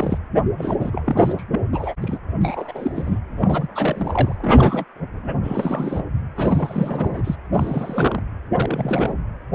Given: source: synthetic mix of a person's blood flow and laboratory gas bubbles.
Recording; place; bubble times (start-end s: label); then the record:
Doppler ultrasound of blood flow; precordium
0.00-0.17 s: bubbles
0.57-0.76 s: bubbles
0.80-1.44 s: bubbles
1.51-1.60 s: bubbles
1.73-1.94 s: bubbles
2.02-2.19 s: bubbles
2.40-3.19 s: bubbles
3.37-3.68 s: bubbles
3.75-4.84 s: bubbles
5.15-5.28 s: bubbles
5.43-6.07 s: bubbles
6.35-7.35 s: bubbles
7.53-8.23 s: bubbles
8.55-9.13 s: bubbles
9.51-9.55 s: bubbles
From the record:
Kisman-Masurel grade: 342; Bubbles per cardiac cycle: rolling drumbeat, 9 or more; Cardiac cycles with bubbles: 100%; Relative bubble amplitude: moderate (0.250 to 0.450); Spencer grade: 3 (all of the cardiac periods contain showers or single bubble signals, but not dominating or overriding the cardiac motion signals); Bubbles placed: anywhere in the cardiac cycle